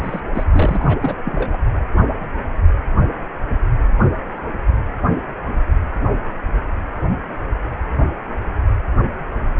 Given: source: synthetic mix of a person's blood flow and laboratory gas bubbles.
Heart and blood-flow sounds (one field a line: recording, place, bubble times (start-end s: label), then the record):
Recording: Doppler ultrasound of blood flow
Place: precordium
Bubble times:
0.00-0.20 s: bubbles
0.34-0.44 s: bubbles
0.54-1.16 s: bubbles
1.25-1.57 s: bubbles
From the record:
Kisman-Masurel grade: 221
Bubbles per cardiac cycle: several, 3 to 8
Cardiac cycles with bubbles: 10 to 50%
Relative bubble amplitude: barely perceptible (0.100 to 0.250)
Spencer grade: 2 (many but less than half of the cardiac periods contain bubble signals, singularly or in groups)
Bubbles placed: anywhere in the cardiac cycle